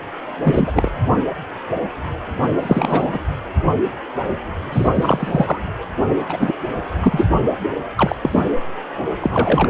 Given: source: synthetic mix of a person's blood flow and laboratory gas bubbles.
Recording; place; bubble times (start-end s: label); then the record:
Doppler ultrasound of blood flow; precordium
0.43-0.92 s: bubbles
2.60-3.18 s: bubbles
4.72-4.88 s: bubbles
4.94-5.59 s: bubbles
6.17-6.52 s: bubbles
7.02-7.29 s: bubbles
7.97-8.16 s: bubbles
8.22-8.43 s: bubbles
9.21-9.70 s: bubbles
From the record:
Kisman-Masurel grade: 223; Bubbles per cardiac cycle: several, 3 to 8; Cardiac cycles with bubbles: 10 to 50%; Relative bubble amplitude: loud (0.450 to 0.775); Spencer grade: 2 (many but less than half of the cardiac periods contain bubble signals, singularly or in groups); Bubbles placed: anywhere in the cardiac cycle